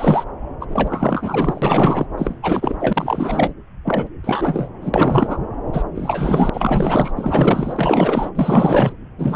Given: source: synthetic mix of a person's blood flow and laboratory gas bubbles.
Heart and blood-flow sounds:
Doppler ultrasound of blood flow; subclavian vein
0.00-0.25 s: bubbles
0.60-0.66 s: bubbles
0.68-2.05 s: bubbles
2.17-2.40 s: bubbles
2.42-3.53 s: bubbles
3.85-4.08 s: bubbles
4.24-4.70 s: bubbles
4.81-5.38 s: bubbles
5.72-5.83 s: bubbles
5.95-6.50 s: bubbles
6.53-7.12 s: bubbles
7.16-8.29 s: bubbles
8.35-8.93 s: bubbles
9.18-9.36 s: bubbles
From the record:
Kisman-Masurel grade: 444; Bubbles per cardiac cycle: continuous sound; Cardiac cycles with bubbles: 100%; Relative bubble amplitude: maximal (0.775 to 0.999); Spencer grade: 4 (maximum detectable bubble signal sounding continuously throughout systole and diastole of every cardiac period, and overriding the amplitude of the normal cardiac signals); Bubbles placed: anywhere in the cardiac cycle

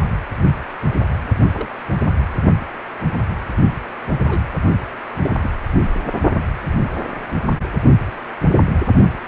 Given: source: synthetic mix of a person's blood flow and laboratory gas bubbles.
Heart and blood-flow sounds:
Doppler ultrasound of blood flow; precordium
1.54-1.68 s: bubbles
4.27-4.39 s: bubbles
5.21-5.35 s: bubbles
5.38-5.50 s: bubbles
From the record:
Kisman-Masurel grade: 121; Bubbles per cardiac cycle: 1 to 2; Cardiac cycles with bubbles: 10 to 50%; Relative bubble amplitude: barely perceptible (0.100 to 0.250); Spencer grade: 2 (many but less than half of the cardiac periods contain bubble signals, singularly or in groups); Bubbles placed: only in the low amplitude regions of the cardiac cycle

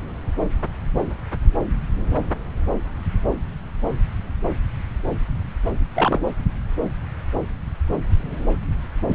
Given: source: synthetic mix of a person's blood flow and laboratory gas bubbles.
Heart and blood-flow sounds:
Doppler ultrasound of blood flow; subclavian vein
5.95-6.18 s: bubbles
9.08-9.15 s: bubbles
From the record:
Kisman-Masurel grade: 123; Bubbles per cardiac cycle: 1 to 2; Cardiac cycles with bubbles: 10 to 50%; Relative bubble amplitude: loud (0.450 to 0.775); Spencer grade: 2 (many but less than half of the cardiac periods contain bubble signals, singularly or in groups); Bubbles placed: anywhere in the cardiac cycle

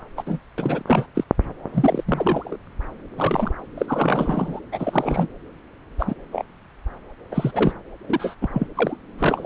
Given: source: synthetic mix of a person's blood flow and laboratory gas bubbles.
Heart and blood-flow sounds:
Doppler ultrasound of blood flow; subclavian vein
0.17-0.23 s: bubbles
0.26-0.39 s: bubbles
0.57-0.82 s: bubbles
0.87-1.06 s: bubbles
1.15-1.24 s: bubbles
1.74-2.04 s: bubbles
2.06-2.56 s: bubbles
3.17-3.52 s: bubbles
3.78-4.59 s: bubbles
4.71-5.28 s: bubbles
5.99-6.15 s: bubbles
6.32-6.45 s: bubbles
7.31-7.74 s: bubbles
8.08-8.35 s: bubbles
8.41-8.47 s: bubbles
8.53-8.67 s: bubbles
8.75-8.97 s: bubbles
9.18-9.46 s: bubbles
From the record:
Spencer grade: 3 (all of the cardiac periods contain showers or single bubble signals, but not dominating or overriding the cardiac motion signals); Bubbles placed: anywhere in the cardiac cycle

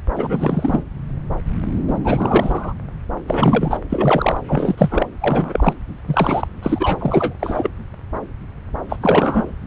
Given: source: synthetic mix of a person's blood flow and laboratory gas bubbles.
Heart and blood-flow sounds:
Doppler ultrasound of blood flow; subclavian vein
0.15-0.84 s: bubbles
1.88-1.92 s: bubbles
2.04-2.73 s: bubbles
3.27-3.78 s: bubbles
3.90-4.40 s: bubbles
4.47-5.07 s: bubbles
5.20-5.74 s: bubbles
6.07-6.48 s: bubbles
6.62-7.34 s: bubbles
7.39-7.70 s: bubbles
8.89-8.96 s: bubbles
9.02-9.52 s: bubbles
From the record:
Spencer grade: 3 (all of the cardiac periods contain showers or single bubble signals, but not dominating or overriding the cardiac motion signals); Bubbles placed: anywhere in the cardiac cycle

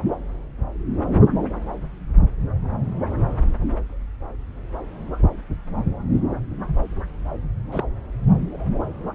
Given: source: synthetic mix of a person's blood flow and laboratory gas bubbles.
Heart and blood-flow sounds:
Doppler ultrasound of blood flow; subclavian vein
7.71-7.84 s: bubbles
From the record:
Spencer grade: 1 (occasional bubble signal discernible with the cardiac motion signal, with majority of cardiac periods free of bubbles); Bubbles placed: anywhere in the cardiac cycle

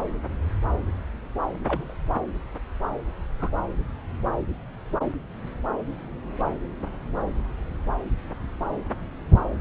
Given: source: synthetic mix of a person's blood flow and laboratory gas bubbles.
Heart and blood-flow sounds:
Doppler ultrasound of blood flow; subclavian vein
1.67-1.94 s: bubbles
3.40-3.50 s: bubbles
From the record:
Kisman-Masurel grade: 112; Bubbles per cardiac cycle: 1 to 2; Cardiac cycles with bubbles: 1 to 10%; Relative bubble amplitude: moderate (0.250 to 0.450); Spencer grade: 1 (occasional bubble signal discernible with the cardiac motion signal, with majority of cardiac periods free of bubbles); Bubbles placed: anywhere in the cardiac cycle

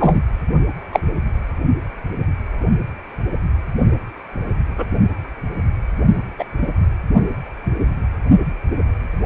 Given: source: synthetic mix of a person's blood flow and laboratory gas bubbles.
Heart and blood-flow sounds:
Doppler ultrasound of blood flow; precordium
0.00-0.21 s: bubbles
0.92-0.99 s: bubbles
4.77-4.86 s: bubbles
6.38-6.44 s: bubbles
6.61-6.70 s: bubbles
From the record:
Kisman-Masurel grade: 123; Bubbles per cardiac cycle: 1 to 2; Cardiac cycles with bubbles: 10 to 50%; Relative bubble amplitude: loud (0.450 to 0.775); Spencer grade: 2 (many but less than half of the cardiac periods contain bubble signals, singularly or in groups); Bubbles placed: only in the low amplitude regions of the cardiac cycle

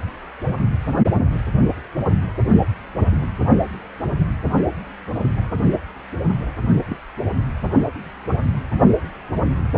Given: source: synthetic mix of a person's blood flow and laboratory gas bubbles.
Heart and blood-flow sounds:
Doppler ultrasound of blood flow; precordium
6.87-6.96 s: bubbles
From the record:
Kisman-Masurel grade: 122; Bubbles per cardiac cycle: 1 to 2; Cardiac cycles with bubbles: 10 to 50%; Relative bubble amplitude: moderate (0.250 to 0.450); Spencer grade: 2 (many but less than half of the cardiac periods contain bubble signals, singularly or in groups); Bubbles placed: only in the low amplitude regions of the cardiac cycle

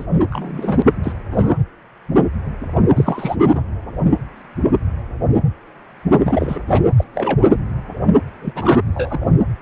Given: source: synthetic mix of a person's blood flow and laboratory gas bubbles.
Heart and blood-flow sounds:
Doppler ultrasound of blood flow; precordium
0.00-0.07 s: bubbles
0.31-0.82 s: bubbles
1.03-1.12 s: bubbles
1.31-1.58 s: bubbles
2.95-3.35 s: bubbles
3.51-3.62 s: bubbles
6.23-6.59 s: bubbles
6.67-6.88 s: bubbles
6.96-7.04 s: bubbles
7.15-7.45 s: bubbles
8.42-8.78 s: bubbles
8.94-9.25 s: bubbles
From the record:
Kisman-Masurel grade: 232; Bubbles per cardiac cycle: several, 3 to 8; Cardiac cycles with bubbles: 50 to 99%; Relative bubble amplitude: moderate (0.250 to 0.450); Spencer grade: 3 (all of the cardiac periods contain showers or single bubble signals, but not dominating or overriding the cardiac motion signals); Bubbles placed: anywhere in the cardiac cycle

